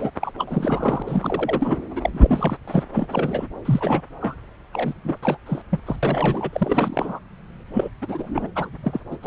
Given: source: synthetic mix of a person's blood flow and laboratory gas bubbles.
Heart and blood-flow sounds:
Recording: Doppler ultrasound of blood flow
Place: subclavian vein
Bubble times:
0.00-0.10 s: bubbles
0.19-0.31 s: bubbles
0.38-1.02 s: bubbles
1.06-1.77 s: bubbles
1.96-2.10 s: bubbles
2.13-2.57 s: bubbles
2.67-2.83 s: bubbles
2.92-3.48 s: bubbles
3.65-4.01 s: bubbles
4.20-4.36 s: bubbles
4.73-4.93 s: bubbles
5.04-5.18 s: bubbles
5.22-5.38 s: bubbles
5.46-5.62 s: bubbles
5.70-5.80 s: bubbles
5.86-5.96 s: bubbles
6.02-6.50 s: bubbles
6.53-7.19 s: bubbles
7.73-7.89 s: bubbles
8.01-8.47 s: bubbles
8.55-8.69 s: bubbles
8.83-9.00 s: bubbles
9.11-9.16 s: bubbles
9.22-9.27 s: bubbles
From the record:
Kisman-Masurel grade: 342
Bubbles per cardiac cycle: rolling drumbeat, 9 or more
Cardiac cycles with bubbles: 100%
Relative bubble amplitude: moderate (0.250 to 0.450)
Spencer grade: 3 (all of the cardiac periods contain showers or single bubble signals, but not dominating or overriding the cardiac motion signals)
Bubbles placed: anywhere in the cardiac cycle

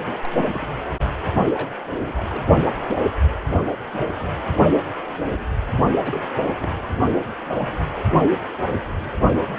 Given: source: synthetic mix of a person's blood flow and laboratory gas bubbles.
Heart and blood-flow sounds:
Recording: Doppler ultrasound of blood flow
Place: precordium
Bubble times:
0.05-0.19 s: bubbles
0.23-0.29 s: bubbles
0.35-0.46 s: bubbles
0.53-0.72 s: bubbles
0.78-0.82 s: bubbles
1.53-1.69 s: bubbles
1.91-1.96 s: bubbles
2.06-2.13 s: bubbles
2.15-2.43 s: bubbles
6.03-6.19 s: bubbles
6.38-6.46 s: bubbles
6.62-6.71 s: bubbles
6.79-6.83 s: bubbles
From the record:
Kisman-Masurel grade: 221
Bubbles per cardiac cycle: several, 3 to 8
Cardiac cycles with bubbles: 10 to 50%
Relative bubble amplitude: barely perceptible (0.100 to 0.250)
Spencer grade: 2 (many but less than half of the cardiac periods contain bubble signals, singularly or in groups)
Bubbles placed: only in the low amplitude regions of the cardiac cycle

